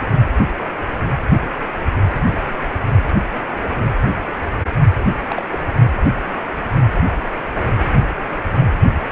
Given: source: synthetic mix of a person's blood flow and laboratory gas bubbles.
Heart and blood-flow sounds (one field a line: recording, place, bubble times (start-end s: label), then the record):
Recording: Doppler ultrasound of blood flow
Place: precordium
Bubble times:
5.29-5.42 s: bubbles
5.51-5.58 s: bubbles
From the record:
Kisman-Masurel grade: 121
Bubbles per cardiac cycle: 1 to 2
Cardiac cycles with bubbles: 10 to 50%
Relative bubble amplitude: barely perceptible (0.100 to 0.250)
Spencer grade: 2 (many but less than half of the cardiac periods contain bubble signals, singularly or in groups)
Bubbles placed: anywhere in the cardiac cycle